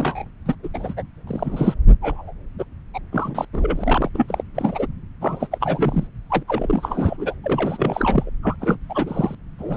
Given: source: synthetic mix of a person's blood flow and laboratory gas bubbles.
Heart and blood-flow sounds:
Doppler ultrasound of blood flow; subclavian vein
0.00-0.24 s: bubbles
0.46-0.55 s: bubbles
0.63-0.68 s: bubbles
0.74-0.94 s: bubbles
0.97-1.03 s: bubbles
1.27-1.74 s: bubbles
2.01-2.32 s: bubbles
2.58-2.65 s: bubbles
2.93-2.99 s: bubbles
3.12-3.45 s: bubbles
3.53-4.09 s: bubbles
4.14-4.42 s: bubbles
4.54-4.87 s: bubbles
5.21-5.47 s: bubbles
5.51-6.07 s: bubbles
6.30-6.43 s: bubbles
6.48-7.34 s: bubbles
7.43-8.30 s: bubbles
8.43-8.56 s: bubbles
8.61-8.79 s: bubbles
8.90-9.35 s: bubbles
9.59-9.76 s: bubbles
From the record:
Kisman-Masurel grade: 342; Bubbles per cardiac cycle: rolling drumbeat, 9 or more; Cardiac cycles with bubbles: 100%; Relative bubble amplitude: moderate (0.250 to 0.450); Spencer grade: 3 (all of the cardiac periods contain showers or single bubble signals, but not dominating or overriding the cardiac motion signals); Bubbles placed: anywhere in the cardiac cycle

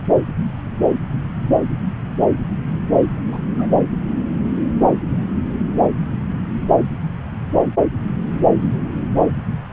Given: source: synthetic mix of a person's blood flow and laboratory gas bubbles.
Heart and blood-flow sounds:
Doppler ultrasound of blood flow; subclavian vein
3.31-3.40 s: bubbles
3.58-3.67 s: bubbles
From the record:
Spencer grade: 1 (occasional bubble signal discernible with the cardiac motion signal, with majority of cardiac periods free of bubbles); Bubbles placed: anywhere in the cardiac cycle

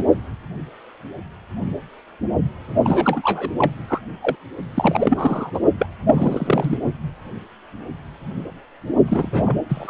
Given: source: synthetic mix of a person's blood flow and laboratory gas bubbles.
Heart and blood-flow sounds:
Doppler ultrasound of blood flow; precordium
0.00-0.04 s: bubbles
2.83-3.50 s: bubbles
3.58-3.71 s: bubbles
3.88-3.99 s: bubbles
4.21-4.36 s: bubbles
4.74-5.51 s: bubbles
5.54-5.60 s: bubbles
5.79-5.87 s: bubbles
6.06-6.77 s: bubbles
9.08-9.57 s: bubbles
9.68-9.90 s: bubbles
From the record:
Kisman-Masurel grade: 232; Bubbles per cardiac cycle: several, 3 to 8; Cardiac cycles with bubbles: 50 to 99%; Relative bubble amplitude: moderate (0.250 to 0.450); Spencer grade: 3 (all of the cardiac periods contain showers or single bubble signals, but not dominating or overriding the cardiac motion signals); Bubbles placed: only in the low amplitude regions of the cardiac cycle

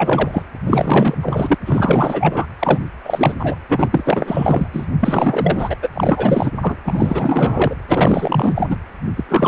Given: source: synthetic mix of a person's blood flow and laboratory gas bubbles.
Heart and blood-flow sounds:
Doppler ultrasound of blood flow; precordium
0.00-0.42 s: bubbles
0.66-1.15 s: bubbles
1.21-1.55 s: bubbles
1.66-2.46 s: bubbles
2.59-2.79 s: bubbles
3.03-3.36 s: bubbles
3.39-3.55 s: bubbles
3.68-4.69 s: bubbles
4.72-4.87 s: bubbles
5.00-5.75 s: bubbles
5.82-5.89 s: bubbles
5.94-6.51 s: bubbles
6.62-6.78 s: bubbles
6.84-7.75 s: bubbles
7.88-8.77 s: bubbles
9.16-9.24 s: bubbles
9.29-9.48 s: bubbles
From the record:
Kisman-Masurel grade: 444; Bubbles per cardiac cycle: continuous sound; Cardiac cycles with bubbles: 100%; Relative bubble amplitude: maximal (0.775 to 0.999); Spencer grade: 4 (maximum detectable bubble signal sounding continuously throughout systole and diastole of every cardiac period, and overriding the amplitude of the normal cardiac signals); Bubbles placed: anywhere in the cardiac cycle

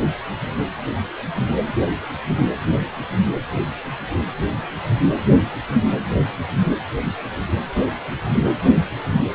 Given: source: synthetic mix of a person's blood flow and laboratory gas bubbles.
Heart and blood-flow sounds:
Doppler ultrasound of blood flow; precordium
no bubbles
From the record:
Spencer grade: 0 (complete lack of bubble signals)

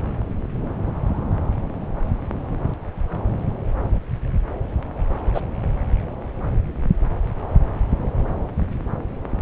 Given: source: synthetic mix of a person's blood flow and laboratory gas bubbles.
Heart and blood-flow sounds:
Doppler ultrasound of blood flow; subclavian vein
5.34-5.41 s: bubbles
From the record:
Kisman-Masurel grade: 113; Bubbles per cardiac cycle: 1 to 2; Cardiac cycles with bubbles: 1 to 10%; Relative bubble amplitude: loud (0.450 to 0.775); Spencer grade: 1 (occasional bubble signal discernible with the cardiac motion signal, with majority of cardiac periods free of bubbles); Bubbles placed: anywhere in the cardiac cycle

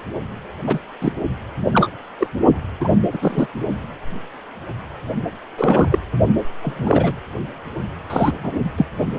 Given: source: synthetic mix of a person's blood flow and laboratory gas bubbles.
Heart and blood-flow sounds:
Doppler ultrasound of blood flow; precordium
0.67-0.79 s: bubbles
1.01-1.12 s: bubbles
1.72-1.90 s: bubbles
2.18-2.26 s: bubbles
2.80-2.88 s: bubbles
3.12-3.18 s: bubbles
3.21-3.47 s: bubbles
5.58-5.98 s: bubbles
6.62-7.13 s: bubbles
8.10-8.31 s: bubbles
8.43-8.52 s: bubbles
8.78-8.86 s: bubbles
From the record:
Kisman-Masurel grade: 233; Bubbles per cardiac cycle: several, 3 to 8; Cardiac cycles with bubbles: 50 to 99%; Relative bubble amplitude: loud (0.450 to 0.775); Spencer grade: 3 (all of the cardiac periods contain showers or single bubble signals, but not dominating or overriding the cardiac motion signals); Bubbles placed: only in the low amplitude regions of the cardiac cycle

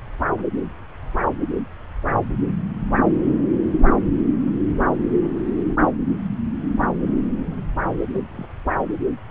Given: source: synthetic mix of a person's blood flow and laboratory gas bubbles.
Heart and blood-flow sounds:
Doppler ultrasound of blood flow; subclavian vein
8.12-8.21 s: bubbles
8.31-8.45 s: bubbles
From the record:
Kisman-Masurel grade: 111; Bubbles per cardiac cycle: 1 to 2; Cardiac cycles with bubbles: 1 to 10%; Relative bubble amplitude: barely perceptible (0.100 to 0.250); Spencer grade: 1 (occasional bubble signal discernible with the cardiac motion signal, with majority of cardiac periods free of bubbles); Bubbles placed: anywhere in the cardiac cycle

